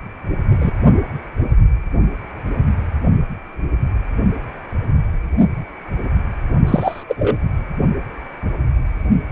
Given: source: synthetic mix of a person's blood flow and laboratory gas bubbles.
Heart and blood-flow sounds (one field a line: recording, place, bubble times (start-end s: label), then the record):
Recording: Doppler ultrasound of blood flow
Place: precordium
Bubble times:
0.61-0.70 s: bubbles
6.67-7.04 s: bubbles
7.08-7.15 s: bubbles
7.19-7.37 s: bubbles
From the record:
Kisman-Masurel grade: 223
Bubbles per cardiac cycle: several, 3 to 8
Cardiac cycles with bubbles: 10 to 50%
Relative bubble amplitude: loud (0.450 to 0.775)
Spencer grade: 2 (many but less than half of the cardiac periods contain bubble signals, singularly or in groups)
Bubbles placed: only in the low amplitude regions of the cardiac cycle